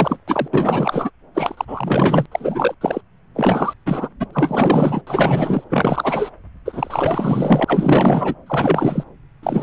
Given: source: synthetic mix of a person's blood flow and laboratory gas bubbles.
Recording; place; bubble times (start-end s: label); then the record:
Doppler ultrasound of blood flow; subclavian vein
0.00-0.19 s: bubbles
0.28-0.48 s: bubbles
0.53-1.10 s: bubbles
1.34-2.26 s: bubbles
2.32-2.75 s: bubbles
2.81-3.01 s: bubbles
3.35-3.74 s: bubbles
3.86-4.09 s: bubbles
4.19-4.26 s: bubbles
4.29-5.01 s: bubbles
5.06-5.64 s: bubbles
5.70-6.30 s: bubbles
6.65-8.35 s: bubbles
8.46-9.04 s: bubbles
9.43-9.63 s: bubbles
From the record:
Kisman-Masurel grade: 444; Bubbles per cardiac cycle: continuous sound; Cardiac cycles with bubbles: 100%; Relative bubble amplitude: maximal (0.775 to 0.999); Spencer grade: 4 (maximum detectable bubble signal sounding continuously throughout systole and diastole of every cardiac period, and overriding the amplitude of the normal cardiac signals); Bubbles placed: anywhere in the cardiac cycle